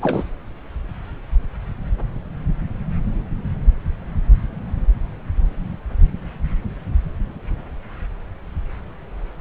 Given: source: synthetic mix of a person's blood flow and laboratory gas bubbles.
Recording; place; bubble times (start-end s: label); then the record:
Doppler ultrasound of blood flow; subclavian vein
0.01-0.24 s: bubbles
From the record:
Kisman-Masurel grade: 212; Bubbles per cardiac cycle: several, 3 to 8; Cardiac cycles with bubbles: 1 to 10%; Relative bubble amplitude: moderate (0.250 to 0.450); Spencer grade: 1 (occasional bubble signal discernible with the cardiac motion signal, with majority of cardiac periods free of bubbles); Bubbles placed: anywhere in the cardiac cycle